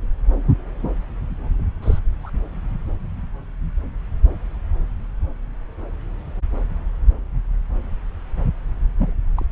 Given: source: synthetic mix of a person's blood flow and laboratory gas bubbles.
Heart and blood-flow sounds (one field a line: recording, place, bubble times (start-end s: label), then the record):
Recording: Doppler ultrasound of blood flow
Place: subclavian vein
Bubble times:
1.59-1.62 s: bubbles
1.82-1.99 s: bubbles
2.23-2.30 s: bubbles
8.98-9.13 s: bubbles
9.37-9.46 s: bubbles
From the record:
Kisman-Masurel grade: 221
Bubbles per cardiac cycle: several, 3 to 8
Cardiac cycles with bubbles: 10 to 50%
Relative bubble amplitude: barely perceptible (0.100 to 0.250)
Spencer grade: 2 (many but less than half of the cardiac periods contain bubble signals, singularly or in groups)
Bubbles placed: anywhere in the cardiac cycle